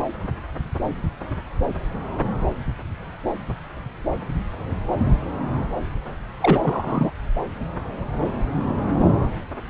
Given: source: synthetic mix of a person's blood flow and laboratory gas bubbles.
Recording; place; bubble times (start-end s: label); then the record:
Doppler ultrasound of blood flow; subclavian vein
6.41-7.11 s: bubbles
From the record:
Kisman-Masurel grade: 213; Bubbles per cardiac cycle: several, 3 to 8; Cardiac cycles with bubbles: 1 to 10%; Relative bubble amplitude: loud (0.450 to 0.775); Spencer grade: 1 (occasional bubble signal discernible with the cardiac motion signal, with majority of cardiac periods free of bubbles); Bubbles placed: anywhere in the cardiac cycle